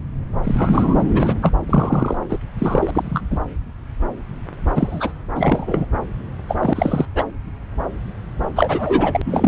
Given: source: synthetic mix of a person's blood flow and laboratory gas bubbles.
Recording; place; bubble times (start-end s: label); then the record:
Doppler ultrasound of blood flow; subclavian vein
0.44-0.96 s: bubbles
1.06-1.34 s: bubbles
1.42-1.52 s: bubbles
1.68-2.17 s: bubbles
2.29-2.39 s: bubbles
2.58-2.91 s: bubbles
2.93-3.21 s: bubbles
3.31-3.40 s: bubbles
4.75-5.11 s: bubbles
5.35-5.85 s: bubbles
6.48-6.56 s: bubbles
6.59-7.05 s: bubbles
7.15-7.25 s: bubbles
8.55-9.21 s: bubbles
9.24-9.48 s: bubbles
From the record:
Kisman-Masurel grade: 233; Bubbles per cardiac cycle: several, 3 to 8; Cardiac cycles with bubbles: 50 to 99%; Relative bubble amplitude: loud (0.450 to 0.775); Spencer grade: 3 (all of the cardiac periods contain showers or single bubble signals, but not dominating or overriding the cardiac motion signals); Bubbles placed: anywhere in the cardiac cycle